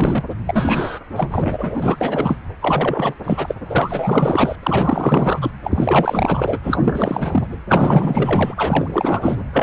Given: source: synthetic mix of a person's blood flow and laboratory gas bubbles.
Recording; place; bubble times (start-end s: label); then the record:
Doppler ultrasound of blood flow; precordium
0.00-0.24 s: bubbles
0.45-0.99 s: bubbles
1.15-2.39 s: bubbles
2.62-3.14 s: bubbles
3.24-3.54 s: bubbles
3.69-4.56 s: bubbles
4.62-5.51 s: bubbles
5.64-6.58 s: bubbles
6.63-7.58 s: bubbles
7.69-8.54 s: bubbles
8.56-9.44 s: bubbles
9.52-9.63 s: bubbles
From the record:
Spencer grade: 4 (maximum detectable bubble signal sounding continuously throughout systole and diastole of every cardiac period, and overriding the amplitude of the normal cardiac signals); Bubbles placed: anywhere in the cardiac cycle